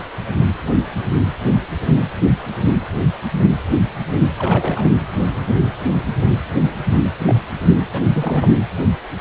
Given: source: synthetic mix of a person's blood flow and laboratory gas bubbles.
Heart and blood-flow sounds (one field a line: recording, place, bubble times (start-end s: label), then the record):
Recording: Doppler ultrasound of blood flow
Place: precordium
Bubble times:
4.39-4.88 s: bubbles
7.00-7.10 s: bubbles
7.19-7.35 s: bubbles
7.92-8.60 s: bubbles
From the record:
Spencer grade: 2 (many but less than half of the cardiac periods contain bubble signals, singularly or in groups)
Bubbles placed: anywhere in the cardiac cycle